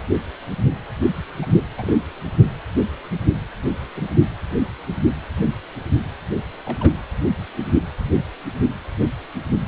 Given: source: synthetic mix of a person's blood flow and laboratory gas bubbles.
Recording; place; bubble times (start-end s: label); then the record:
Doppler ultrasound of blood flow; precordium
1.42-1.46 s: bubbles
1.55-1.63 s: bubbles
1.77-1.96 s: bubbles
3.96-4.05 s: bubbles
6.65-6.92 s: bubbles
From the record:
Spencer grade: 2 (many but less than half of the cardiac periods contain bubble signals, singularly or in groups); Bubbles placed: anywhere in the cardiac cycle